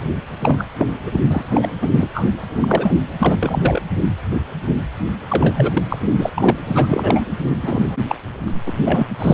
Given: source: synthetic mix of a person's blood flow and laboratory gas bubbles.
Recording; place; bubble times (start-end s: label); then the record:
Doppler ultrasound of blood flow; precordium
0.41-0.65 s: bubbles
0.78-0.86 s: bubbles
1.06-1.20 s: bubbles
1.30-1.73 s: bubbles
1.82-1.89 s: bubbles
1.91-2.08 s: bubbles
2.13-2.28 s: bubbles
2.56-2.99 s: bubbles
3.19-3.82 s: bubbles
5.29-5.72 s: bubbles
5.75-5.83 s: bubbles
5.89-5.98 s: bubbles
6.19-6.29 s: bubbles
6.34-6.56 s: bubbles
6.64-7.25 s: bubbles
7.63-7.96 s: bubbles
8.08-8.16 s: bubbles
8.46-8.53 s: bubbles
8.66-8.73 s: bubbles
8.85-9.08 s: bubbles
9.19-9.34 s: bubbles
From the record:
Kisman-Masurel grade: 233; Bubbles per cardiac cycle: several, 3 to 8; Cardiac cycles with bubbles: 50 to 99%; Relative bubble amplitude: loud (0.450 to 0.775); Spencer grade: 3 (all of the cardiac periods contain showers or single bubble signals, but not dominating or overriding the cardiac motion signals); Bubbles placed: anywhere in the cardiac cycle